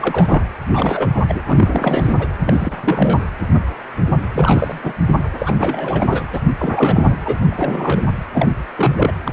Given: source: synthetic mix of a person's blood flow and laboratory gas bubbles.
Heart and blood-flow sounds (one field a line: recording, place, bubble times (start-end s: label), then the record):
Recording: Doppler ultrasound of blood flow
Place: precordium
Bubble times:
0.00-0.42 s: bubbles
0.72-1.24 s: bubbles
1.28-1.41 s: bubbles
1.46-2.13 s: bubbles
2.19-2.29 s: bubbles
2.46-3.18 s: bubbles
4.33-4.79 s: bubbles
4.83-4.93 s: bubbles
5.06-5.15 s: bubbles
5.39-5.54 s: bubbles
5.58-6.28 s: bubbles
6.32-6.41 s: bubbles
6.58-7.19 s: bubbles
7.25-8.07 s: bubbles
8.33-8.54 s: bubbles
8.76-9.15 s: bubbles
9.24-9.31 s: bubbles
From the record:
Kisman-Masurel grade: 332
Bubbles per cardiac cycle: rolling drumbeat, 9 or more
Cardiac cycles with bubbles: 50 to 99%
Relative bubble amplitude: moderate (0.250 to 0.450)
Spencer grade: 3 (all of the cardiac periods contain showers or single bubble signals, but not dominating or overriding the cardiac motion signals)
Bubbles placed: anywhere in the cardiac cycle